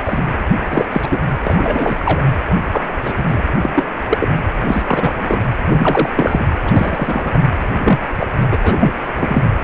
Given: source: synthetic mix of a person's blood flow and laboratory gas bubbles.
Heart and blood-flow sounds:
Doppler ultrasound of blood flow; precordium
0.05-0.23 s: bubbles
0.70-0.85 s: bubbles
0.91-1.08 s: bubbles
1.10-1.22 s: bubbles
1.45-2.22 s: bubbles
2.71-2.84 s: bubbles
3.03-3.43 s: bubbles
3.60-3.71 s: bubbles
3.75-3.84 s: bubbles
4.09-4.29 s: bubbles
4.67-5.15 s: bubbles
5.19-5.41 s: bubbles
5.68-6.09 s: bubbles
6.16-6.46 s: bubbles
6.65-7.38 s: bubbles
7.62-7.67 s: bubbles
7.83-7.99 s: bubbles
8.20-8.29 s: bubbles
8.51-8.57 s: bubbles
8.62-8.75 s: bubbles
8.80-8.93 s: bubbles
9.20-9.43 s: bubbles
From the record:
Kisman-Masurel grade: 243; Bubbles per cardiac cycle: several, 3 to 8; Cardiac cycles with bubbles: 100%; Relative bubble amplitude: loud (0.450 to 0.775); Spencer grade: 3 (all of the cardiac periods contain showers or single bubble signals, but not dominating or overriding the cardiac motion signals); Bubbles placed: anywhere in the cardiac cycle

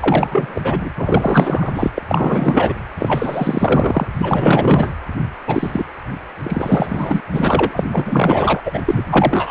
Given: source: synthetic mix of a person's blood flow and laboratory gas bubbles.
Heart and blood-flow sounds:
Doppler ultrasound of blood flow; precordium
0.00-0.91 s: bubbles
0.97-1.71 s: bubbles
1.74-1.90 s: bubbles
1.98-2.02 s: bubbles
2.08-2.73 s: bubbles
2.98-4.07 s: bubbles
4.18-4.93 s: bubbles
5.47-5.84 s: bubbles
6.43-7.20 s: bubbles
7.33-7.85 s: bubbles
7.92-8.61 s: bubbles
8.66-8.80 s: bubbles
8.86-9.06 s: bubbles
9.10-9.51 s: bubbles
From the record:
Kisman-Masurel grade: 444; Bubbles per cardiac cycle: continuous sound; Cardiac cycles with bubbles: 100%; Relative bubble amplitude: maximal (0.775 to 0.999); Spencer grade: 4 (maximum detectable bubble signal sounding continuously throughout systole and diastole of every cardiac period, and overriding the amplitude of the normal cardiac signals); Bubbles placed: anywhere in the cardiac cycle

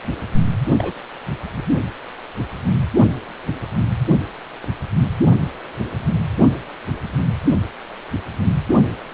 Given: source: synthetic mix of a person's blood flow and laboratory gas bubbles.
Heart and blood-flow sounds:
Doppler ultrasound of blood flow; precordium
0.78-0.93 s: bubbles
From the record:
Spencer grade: 1 (occasional bubble signal discernible with the cardiac motion signal, with majority of cardiac periods free of bubbles); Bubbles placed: only in the low amplitude regions of the cardiac cycle

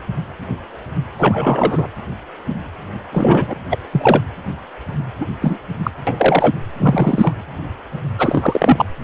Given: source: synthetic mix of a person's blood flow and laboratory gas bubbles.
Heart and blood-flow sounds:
Doppler ultrasound of blood flow; precordium
1.19-1.88 s: bubbles
3.11-3.53 s: bubbles
3.70-3.78 s: bubbles
3.93-4.22 s: bubbles
5.20-5.26 s: bubbles
5.41-5.58 s: bubbles
5.83-5.91 s: bubbles
6.07-6.52 s: bubbles
6.79-7.33 s: bubbles
8.19-8.86 s: bubbles
From the record:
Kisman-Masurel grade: 233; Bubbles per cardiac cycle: several, 3 to 8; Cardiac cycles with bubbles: 50 to 99%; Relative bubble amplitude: loud (0.450 to 0.775); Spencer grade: 3 (all of the cardiac periods contain showers or single bubble signals, but not dominating or overriding the cardiac motion signals); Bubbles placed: anywhere in the cardiac cycle

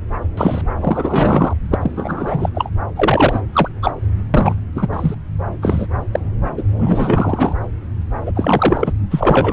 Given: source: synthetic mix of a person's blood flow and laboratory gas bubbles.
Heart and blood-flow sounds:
Doppler ultrasound of blood flow; subclavian vein
0.37-0.61 s: bubbles
0.80-1.53 s: bubbles
1.71-2.49 s: bubbles
2.54-2.69 s: bubbles
2.96-3.42 s: bubbles
3.53-3.69 s: bubbles
3.82-3.92 s: bubbles
4.34-4.54 s: bubbles
4.75-4.87 s: bubbles
4.92-5.14 s: bubbles
5.62-5.87 s: bubbles
6.13-6.20 s: bubbles
6.57-6.63 s: bubbles
6.78-7.53 s: bubbles
8.26-8.32 s: bubbles
8.35-8.93 s: bubbles
9.11-9.53 s: bubbles
From the record:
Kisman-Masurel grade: 243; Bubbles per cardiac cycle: several, 3 to 8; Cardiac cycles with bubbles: 100%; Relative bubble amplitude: loud (0.450 to 0.775); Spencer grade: 3 (all of the cardiac periods contain showers or single bubble signals, but not dominating or overriding the cardiac motion signals); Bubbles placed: anywhere in the cardiac cycle

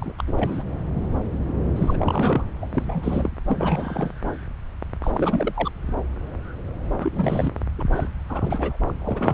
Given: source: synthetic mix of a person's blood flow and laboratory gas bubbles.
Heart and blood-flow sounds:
Doppler ultrasound of blood flow; subclavian vein
0.00-0.12 s: bubbles
0.17-0.23 s: bubbles
0.27-0.62 s: bubbles
1.75-2.44 s: bubbles
2.61-2.66 s: bubbles
2.73-3.29 s: bubbles
3.48-4.11 s: bubbles
5.02-5.71 s: bubbles
7.00-7.52 s: bubbles
7.79-7.83 s: bubbles
7.96-8.09 s: bubbles
8.29-8.77 s: bubbles
8.88-9.34 s: bubbles
From the record:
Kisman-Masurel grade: 332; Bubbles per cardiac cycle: rolling drumbeat, 9 or more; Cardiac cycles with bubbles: 50 to 99%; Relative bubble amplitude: moderate (0.250 to 0.450); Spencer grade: 3 (all of the cardiac periods contain showers or single bubble signals, but not dominating or overriding the cardiac motion signals); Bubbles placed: anywhere in the cardiac cycle

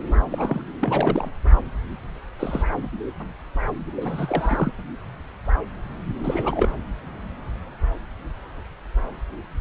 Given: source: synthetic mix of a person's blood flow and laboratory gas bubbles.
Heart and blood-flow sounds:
Doppler ultrasound of blood flow; subclavian vein
0.29-0.61 s: bubbles
0.79-1.31 s: bubbles
2.39-2.64 s: bubbles
4.00-4.73 s: bubbles
6.24-6.69 s: bubbles
From the record:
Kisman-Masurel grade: 222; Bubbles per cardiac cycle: several, 3 to 8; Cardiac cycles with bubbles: 10 to 50%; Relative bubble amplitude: moderate (0.250 to 0.450); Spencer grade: 2 (many but less than half of the cardiac periods contain bubble signals, singularly or in groups); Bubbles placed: anywhere in the cardiac cycle

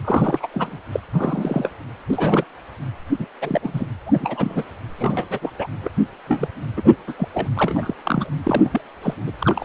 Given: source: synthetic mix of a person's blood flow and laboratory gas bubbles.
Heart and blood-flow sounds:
Doppler ultrasound of blood flow; precordium
0.04-0.48 s: bubbles
0.51-0.81 s: bubbles
0.93-0.99 s: bubbles
1.12-1.71 s: bubbles
2.08-2.44 s: bubbles
3.19-3.25 s: bubbles
3.41-3.86 s: bubbles
4.06-4.64 s: bubbles
4.99-5.27 s: bubbles
5.30-5.52 s: bubbles
5.58-5.68 s: bubbles
5.84-5.90 s: bubbles
6.27-6.48 s: bubbles
6.76-6.98 s: bubbles
7.07-7.14 s: bubbles
7.19-7.29 s: bubbles
7.33-7.49 s: bubbles
7.55-7.94 s: bubbles
8.05-8.29 s: bubbles
8.43-8.81 s: bubbles
9.03-9.14 s: bubbles
9.26-9.31 s: bubbles
9.39-9.65 s: bubbles
From the record:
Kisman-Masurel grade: 242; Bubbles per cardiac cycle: several, 3 to 8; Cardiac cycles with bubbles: 100%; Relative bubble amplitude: moderate (0.250 to 0.450); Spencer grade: 3 (all of the cardiac periods contain showers or single bubble signals, but not dominating or overriding the cardiac motion signals); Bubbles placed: anywhere in the cardiac cycle

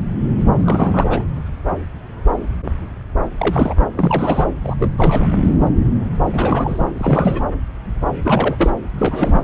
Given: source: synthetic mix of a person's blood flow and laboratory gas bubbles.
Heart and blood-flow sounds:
Doppler ultrasound of blood flow; subclavian vein
0.57-1.23 s: bubbles
3.38-3.76 s: bubbles
3.79-3.86 s: bubbles
3.95-4.47 s: bubbles
4.63-4.75 s: bubbles
4.79-4.95 s: bubbles
4.97-5.27 s: bubbles
6.33-6.86 s: bubbles
6.97-7.41 s: bubbles
8.24-8.70 s: bubbles
8.97-9.44 s: bubbles
From the record:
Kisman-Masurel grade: 332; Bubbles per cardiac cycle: rolling drumbeat, 9 or more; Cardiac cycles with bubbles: 50 to 99%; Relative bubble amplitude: moderate (0.250 to 0.450); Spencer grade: 3 (all of the cardiac periods contain showers or single bubble signals, but not dominating or overriding the cardiac motion signals); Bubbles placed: anywhere in the cardiac cycle

